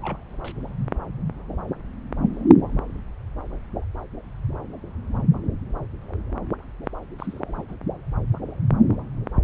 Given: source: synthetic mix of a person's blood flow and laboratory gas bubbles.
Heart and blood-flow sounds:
Doppler ultrasound of blood flow; subclavian vein
0.02-0.17 s: bubbles
0.44-0.52 s: bubbles
7.19-7.39 s: bubbles
7.47-7.62 s: bubbles
7.69-7.75 s: bubbles
From the record:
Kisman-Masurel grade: 221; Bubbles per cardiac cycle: several, 3 to 8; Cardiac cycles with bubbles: 10 to 50%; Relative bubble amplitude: barely perceptible (0.100 to 0.250); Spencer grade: 2 (many but less than half of the cardiac periods contain bubble signals, singularly or in groups); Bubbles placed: anywhere in the cardiac cycle

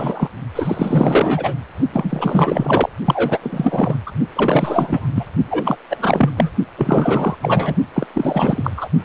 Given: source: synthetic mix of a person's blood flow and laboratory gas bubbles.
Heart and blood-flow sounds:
Doppler ultrasound of blood flow; precordium
0.00-0.29 s: bubbles
0.55-1.59 s: bubbles
1.93-2.89 s: bubbles
3.05-3.38 s: bubbles
3.41-3.96 s: bubbles
4.06-4.12 s: bubbles
4.34-5.08 s: bubbles
5.14-5.25 s: bubbles
5.50-5.79 s: bubbles
5.90-6.29 s: bubbles
6.36-6.51 s: bubbles
6.78-7.35 s: bubbles
7.42-7.75 s: bubbles
7.93-8.07 s: bubbles
8.14-8.72 s: bubbles
8.77-8.89 s: bubbles
From the record:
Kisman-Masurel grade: 444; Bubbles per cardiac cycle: continuous sound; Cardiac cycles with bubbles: 100%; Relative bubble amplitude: maximal (0.775 to 0.999); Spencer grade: 4 (maximum detectable bubble signal sounding continuously throughout systole and diastole of every cardiac period, and overriding the amplitude of the normal cardiac signals); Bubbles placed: only in the low amplitude regions of the cardiac cycle

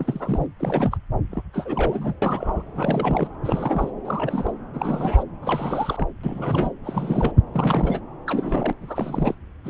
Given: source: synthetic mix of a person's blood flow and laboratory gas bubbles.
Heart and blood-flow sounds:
Doppler ultrasound of blood flow; subclavian vein
0.00-0.46 s: bubbles
0.59-0.97 s: bubbles
1.31-1.43 s: bubbles
1.53-2.14 s: bubbles
2.22-2.64 s: bubbles
2.75-3.28 s: bubbles
3.43-3.91 s: bubbles
4.04-4.52 s: bubbles
4.74-5.24 s: bubbles
5.42-6.08 s: bubbles
6.24-6.73 s: bubbles
6.84-7.33 s: bubbles
7.53-8.01 s: bubbles
8.27-8.73 s: bubbles
8.80-9.35 s: bubbles
9.64-9.69 s: bubbles
From the record:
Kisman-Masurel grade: 342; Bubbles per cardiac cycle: rolling drumbeat, 9 or more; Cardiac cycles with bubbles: 100%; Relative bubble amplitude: moderate (0.250 to 0.450); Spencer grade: 3 (all of the cardiac periods contain showers or single bubble signals, but not dominating or overriding the cardiac motion signals); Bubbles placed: anywhere in the cardiac cycle

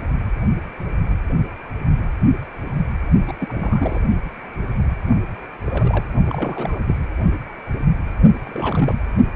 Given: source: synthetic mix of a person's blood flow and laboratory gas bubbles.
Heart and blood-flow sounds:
Doppler ultrasound of blood flow; precordium
3.27-3.33 s: bubbles
3.40-4.00 s: bubbles
5.66-6.04 s: bubbles
6.25-6.80 s: bubbles
6.87-6.96 s: bubbles
8.44-9.01 s: bubbles
From the record:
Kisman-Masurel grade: 221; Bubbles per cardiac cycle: several, 3 to 8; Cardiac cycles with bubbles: 10 to 50%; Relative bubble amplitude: barely perceptible (0.100 to 0.250); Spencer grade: 2 (many but less than half of the cardiac periods contain bubble signals, singularly or in groups); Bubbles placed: only in the low amplitude regions of the cardiac cycle

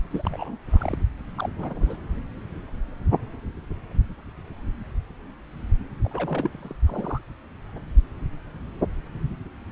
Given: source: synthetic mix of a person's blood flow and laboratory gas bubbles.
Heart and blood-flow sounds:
Doppler ultrasound of blood flow; subclavian vein
0.10-0.57 s: bubbles
0.71-0.97 s: bubbles
1.35-1.50 s: bubbles
1.58-1.97 s: bubbles
6.04-6.75 s: bubbles
6.86-7.21 s: bubbles
From the record:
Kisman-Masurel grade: 221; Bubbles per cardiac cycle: several, 3 to 8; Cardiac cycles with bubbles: 10 to 50%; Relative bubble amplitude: barely perceptible (0.100 to 0.250); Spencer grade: 2 (many but less than half of the cardiac periods contain bubble signals, singularly or in groups); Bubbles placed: anywhere in the cardiac cycle

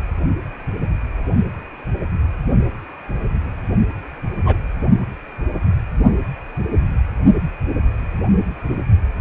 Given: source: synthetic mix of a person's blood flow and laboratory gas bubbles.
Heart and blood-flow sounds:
Doppler ultrasound of blood flow; precordium
4.43-4.58 s: bubbles
From the record:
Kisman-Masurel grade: 122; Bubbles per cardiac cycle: 1 to 2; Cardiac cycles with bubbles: 10 to 50%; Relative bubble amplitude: moderate (0.250 to 0.450); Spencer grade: 2 (many but less than half of the cardiac periods contain bubble signals, singularly or in groups); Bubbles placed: only in the low amplitude regions of the cardiac cycle

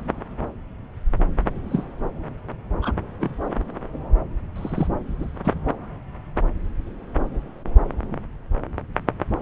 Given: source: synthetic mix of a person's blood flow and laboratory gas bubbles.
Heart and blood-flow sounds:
Doppler ultrasound of blood flow; subclavian vein
1.70-1.83 s: bubbles
2.81-2.93 s: bubbles
3.20-3.29 s: bubbles
4.55-4.88 s: bubbles
5.10-5.33 s: bubbles
5.44-5.54 s: bubbles
From the record:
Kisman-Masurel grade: 122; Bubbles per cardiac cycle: 1 to 2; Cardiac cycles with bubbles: 10 to 50%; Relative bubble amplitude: moderate (0.250 to 0.450); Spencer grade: 2 (many but less than half of the cardiac periods contain bubble signals, singularly or in groups); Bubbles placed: anywhere in the cardiac cycle

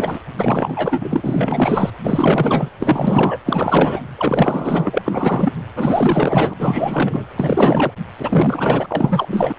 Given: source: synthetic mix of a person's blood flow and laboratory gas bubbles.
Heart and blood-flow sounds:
Doppler ultrasound of blood flow; precordium
0.00-0.19 s: bubbles
0.37-1.91 s: bubbles
2.04-2.69 s: bubbles
2.79-3.38 s: bubbles
3.46-4.01 s: bubbles
4.16-5.55 s: bubbles
5.75-6.54 s: bubbles
6.58-7.30 s: bubbles
7.36-7.92 s: bubbles
8.19-9.54 s: bubbles
From the record:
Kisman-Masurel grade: 444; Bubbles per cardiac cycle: continuous sound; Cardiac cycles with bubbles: 100%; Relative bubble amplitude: maximal (0.775 to 0.999); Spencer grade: 4 (maximum detectable bubble signal sounding continuously throughout systole and diastole of every cardiac period, and overriding the amplitude of the normal cardiac signals); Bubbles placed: anywhere in the cardiac cycle

